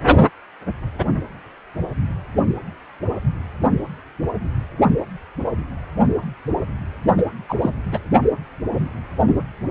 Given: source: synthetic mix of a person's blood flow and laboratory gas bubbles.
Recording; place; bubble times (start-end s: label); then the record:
Doppler ultrasound of blood flow; precordium
7.17-7.23 s: bubbles
7.49-7.57 s: bubbles
7.61-7.70 s: bubbles
7.92-7.99 s: bubbles
From the record:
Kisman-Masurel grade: 212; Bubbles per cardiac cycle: several, 3 to 8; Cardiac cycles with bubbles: 1 to 10%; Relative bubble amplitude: moderate (0.250 to 0.450); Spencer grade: 1 (occasional bubble signal discernible with the cardiac motion signal, with majority of cardiac periods free of bubbles); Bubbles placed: only in the low amplitude regions of the cardiac cycle